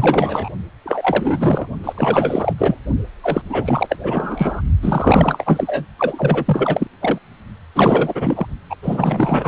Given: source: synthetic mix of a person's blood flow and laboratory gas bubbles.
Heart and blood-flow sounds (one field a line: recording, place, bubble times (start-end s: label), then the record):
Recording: Doppler ultrasound of blood flow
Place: precordium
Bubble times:
0.00-0.49 s: bubbles
0.85-1.68 s: bubbles
1.83-2.53 s: bubbles
2.58-2.76 s: bubbles
3.23-3.42 s: bubbles
3.49-3.97 s: bubbles
4.02-4.61 s: bubbles
4.82-5.85 s: bubbles
5.98-6.87 s: bubbles
7.00-7.18 s: bubbles
7.75-8.46 s: bubbles
8.70-8.76 s: bubbles
8.82-9.48 s: bubbles
From the record:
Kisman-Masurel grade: 444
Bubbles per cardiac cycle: continuous sound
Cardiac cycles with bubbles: 100%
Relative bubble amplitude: maximal (0.775 to 0.999)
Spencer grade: 4 (maximum detectable bubble signal sounding continuously throughout systole and diastole of every cardiac period, and overriding the amplitude of the normal cardiac signals)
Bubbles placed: only in the low amplitude regions of the cardiac cycle